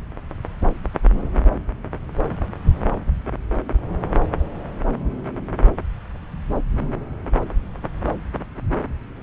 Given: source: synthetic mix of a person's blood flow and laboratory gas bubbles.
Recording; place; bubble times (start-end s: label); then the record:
Doppler ultrasound of blood flow; subclavian vein
no bubbles
From the record:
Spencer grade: 0 (complete lack of bubble signals)